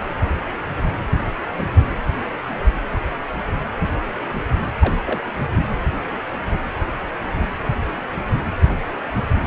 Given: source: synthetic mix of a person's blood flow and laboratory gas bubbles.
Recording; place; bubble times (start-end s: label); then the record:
Doppler ultrasound of blood flow; precordium
4.80-4.95 s: bubbles
5.05-5.19 s: bubbles
From the record:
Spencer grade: 1 (occasional bubble signal discernible with the cardiac motion signal, with majority of cardiac periods free of bubbles); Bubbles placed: anywhere in the cardiac cycle